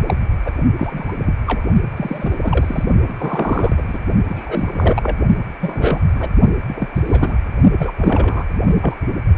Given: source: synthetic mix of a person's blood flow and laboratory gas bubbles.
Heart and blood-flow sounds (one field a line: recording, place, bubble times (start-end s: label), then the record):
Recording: Doppler ultrasound of blood flow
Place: precordium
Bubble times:
0.07-0.16 s: bubbles
0.45-0.54 s: bubbles
0.77-1.14 s: bubbles
1.23-1.33 s: bubbles
1.46-1.63 s: bubbles
1.96-2.37 s: bubbles
2.42-2.84 s: bubbles
3.06-3.83 s: bubbles
3.87-3.99 s: bubbles
4.29-5.17 s: bubbles
5.61-6.01 s: bubbles
6.12-6.32 s: bubbles
6.67-6.89 s: bubbles
6.96-7.36 s: bubbles
7.79-7.92 s: bubbles
7.97-8.44 s: bubbles
8.64-8.76 s: bubbles
8.81-8.96 s: bubbles
From the record:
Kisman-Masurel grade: 242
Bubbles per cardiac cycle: several, 3 to 8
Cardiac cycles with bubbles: 100%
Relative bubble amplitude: moderate (0.250 to 0.450)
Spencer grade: 3 (all of the cardiac periods contain showers or single bubble signals, but not dominating or overriding the cardiac motion signals)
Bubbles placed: only in the low amplitude regions of the cardiac cycle